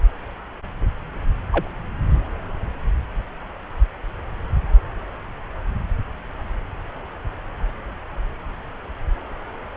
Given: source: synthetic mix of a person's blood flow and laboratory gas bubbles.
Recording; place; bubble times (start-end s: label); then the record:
Doppler ultrasound of blood flow; subclavian vein
1.50-1.77 s: bubbles
From the record:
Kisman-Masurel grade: 112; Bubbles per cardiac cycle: 1 to 2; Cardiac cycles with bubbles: 1 to 10%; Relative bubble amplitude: moderate (0.250 to 0.450); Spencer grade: 1 (occasional bubble signal discernible with the cardiac motion signal, with majority of cardiac periods free of bubbles); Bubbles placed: anywhere in the cardiac cycle